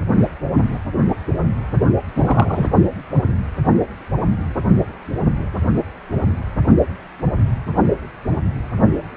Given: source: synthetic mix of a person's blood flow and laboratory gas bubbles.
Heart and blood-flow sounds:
Doppler ultrasound of blood flow; precordium
2.15-2.69 s: bubbles
From the record:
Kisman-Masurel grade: 213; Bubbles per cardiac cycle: several, 3 to 8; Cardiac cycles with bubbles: 1 to 10%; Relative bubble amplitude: loud (0.450 to 0.775); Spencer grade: 1 (occasional bubble signal discernible with the cardiac motion signal, with majority of cardiac periods free of bubbles); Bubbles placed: only in the low amplitude regions of the cardiac cycle

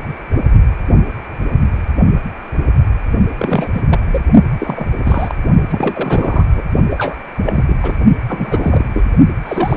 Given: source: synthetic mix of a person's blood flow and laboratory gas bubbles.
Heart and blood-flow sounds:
Doppler ultrasound of blood flow; precordium
3.38-3.82 s: bubbles
3.89-3.99 s: bubbles
4.07-4.21 s: bubbles
4.58-4.87 s: bubbles
5.05-5.35 s: bubbles
5.69-6.45 s: bubbles
6.56-6.62 s: bubbles
6.90-7.16 s: bubbles
7.43-7.77 s: bubbles
7.83-7.96 s: bubbles
8.28-8.88 s: bubbles
8.94-9.05 s: bubbles
9.45-9.76 s: bubbles
From the record:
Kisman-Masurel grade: 332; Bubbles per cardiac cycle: rolling drumbeat, 9 or more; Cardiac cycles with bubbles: 50 to 99%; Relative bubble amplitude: moderate (0.250 to 0.450); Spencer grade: 3 (all of the cardiac periods contain showers or single bubble signals, but not dominating or overriding the cardiac motion signals); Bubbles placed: only in the low amplitude regions of the cardiac cycle

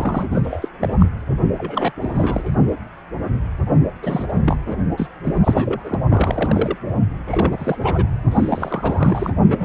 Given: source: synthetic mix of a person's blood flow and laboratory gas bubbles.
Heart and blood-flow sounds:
Doppler ultrasound of blood flow; precordium
0.00-0.69 s: bubbles
0.80-0.97 s: bubbles
1.00-1.09 s: bubbles
1.55-1.92 s: bubbles
2.00-2.51 s: bubbles
4.02-4.57 s: bubbles
4.67-4.76 s: bubbles
4.97-5.08 s: bubbles
5.23-5.98 s: bubbles
6.08-6.76 s: bubbles
7.27-8.05 s: bubbles
8.31-9.33 s: bubbles
9.49-9.65 s: bubbles
From the record:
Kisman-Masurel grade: 332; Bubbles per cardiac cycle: rolling drumbeat, 9 or more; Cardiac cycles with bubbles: 50 to 99%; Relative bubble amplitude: moderate (0.250 to 0.450); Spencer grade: 3 (all of the cardiac periods contain showers or single bubble signals, but not dominating or overriding the cardiac motion signals); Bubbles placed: only in the low amplitude regions of the cardiac cycle

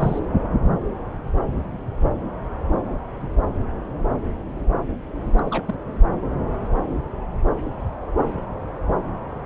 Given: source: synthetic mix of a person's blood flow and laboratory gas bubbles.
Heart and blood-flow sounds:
Doppler ultrasound of blood flow; subclavian vein
0.00-0.20 s: bubbles
5.39-5.42 s: bubbles
5.46-5.75 s: bubbles
From the record:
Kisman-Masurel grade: 221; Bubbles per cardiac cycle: several, 3 to 8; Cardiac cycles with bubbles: 10 to 50%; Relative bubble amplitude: barely perceptible (0.100 to 0.250); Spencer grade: 2 (many but less than half of the cardiac periods contain bubble signals, singularly or in groups); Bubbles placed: anywhere in the cardiac cycle

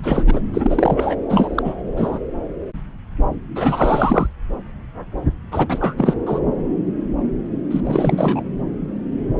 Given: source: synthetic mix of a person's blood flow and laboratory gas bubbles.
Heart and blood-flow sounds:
Doppler ultrasound of blood flow; subclavian vein
0.00-0.23 s: bubbles
0.26-0.42 s: bubbles
0.53-1.15 s: bubbles
1.29-1.75 s: bubbles
1.96-2.19 s: bubbles
3.56-4.27 s: bubbles
5.52-5.94 s: bubbles
5.98-6.14 s: bubbles
6.26-6.40 s: bubbles
7.71-7.81 s: bubbles
7.83-8.43 s: bubbles
From the record:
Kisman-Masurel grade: 333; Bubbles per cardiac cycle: rolling drumbeat, 9 or more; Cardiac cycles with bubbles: 50 to 99%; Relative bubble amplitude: loud (0.450 to 0.775); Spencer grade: 3 (all of the cardiac periods contain showers or single bubble signals, but not dominating or overriding the cardiac motion signals); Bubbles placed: anywhere in the cardiac cycle

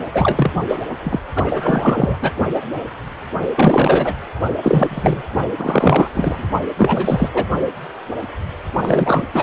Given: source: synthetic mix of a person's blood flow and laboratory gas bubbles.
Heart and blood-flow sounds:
Doppler ultrasound of blood flow; precordium
0.13-0.51 s: bubbles
0.67-0.77 s: bubbles
1.03-1.20 s: bubbles
1.36-2.17 s: bubbles
2.21-2.31 s: bubbles
3.56-4.12 s: bubbles
4.62-5.22 s: bubbles
5.57-6.08 s: bubbles
6.14-6.46 s: bubbles
6.77-7.29 s: bubbles
7.33-7.45 s: bubbles
8.82-9.23 s: bubbles
9.34-9.42 s: bubbles
From the record:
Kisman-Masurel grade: 333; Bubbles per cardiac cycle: rolling drumbeat, 9 or more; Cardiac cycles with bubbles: 50 to 99%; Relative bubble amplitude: loud (0.450 to 0.775); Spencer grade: 3 (all of the cardiac periods contain showers or single bubble signals, but not dominating or overriding the cardiac motion signals); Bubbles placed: only in the low amplitude regions of the cardiac cycle

